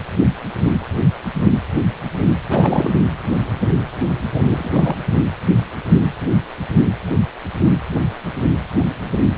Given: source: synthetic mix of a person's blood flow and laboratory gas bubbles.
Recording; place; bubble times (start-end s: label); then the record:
Doppler ultrasound of blood flow; precordium
2.50-3.01 s: bubbles
4.34-4.42 s: bubbles
4.44-4.96 s: bubbles
From the record:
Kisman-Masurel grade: 223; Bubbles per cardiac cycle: several, 3 to 8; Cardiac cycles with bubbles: 10 to 50%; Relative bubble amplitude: loud (0.450 to 0.775); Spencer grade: 2 (many but less than half of the cardiac periods contain bubble signals, singularly or in groups); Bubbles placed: anywhere in the cardiac cycle